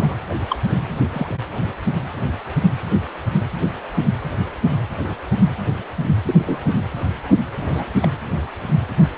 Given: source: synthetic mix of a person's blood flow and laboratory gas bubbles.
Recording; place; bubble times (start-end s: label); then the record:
Doppler ultrasound of blood flow; precordium
0.00-0.17 s: bubbles
0.29-0.35 s: bubbles
0.49-0.57 s: bubbles
1.09-1.35 s: bubbles
6.26-6.70 s: bubbles
7.59-7.85 s: bubbles
8.01-8.08 s: bubbles
From the record:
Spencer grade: 2 (many but less than half of the cardiac periods contain bubble signals, singularly or in groups); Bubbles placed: anywhere in the cardiac cycle